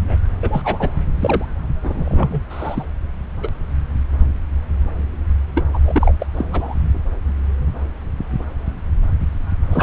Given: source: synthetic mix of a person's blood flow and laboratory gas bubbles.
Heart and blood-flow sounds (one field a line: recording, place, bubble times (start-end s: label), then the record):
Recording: Doppler ultrasound of blood flow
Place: subclavian vein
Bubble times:
0.00-0.18 s: bubbles
0.43-0.96 s: bubbles
1.21-1.45 s: bubbles
1.82-2.42 s: bubbles
2.50-2.85 s: bubbles
3.43-3.48 s: bubbles
5.55-5.66 s: bubbles
5.73-5.79 s: bubbles
5.84-6.15 s: bubbles
6.19-6.26 s: bubbles
6.36-6.45 s: bubbles
6.50-6.75 s: bubbles
9.62-9.83 s: bubbles
From the record:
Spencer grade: 3 (all of the cardiac periods contain showers or single bubble signals, but not dominating or overriding the cardiac motion signals)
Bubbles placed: anywhere in the cardiac cycle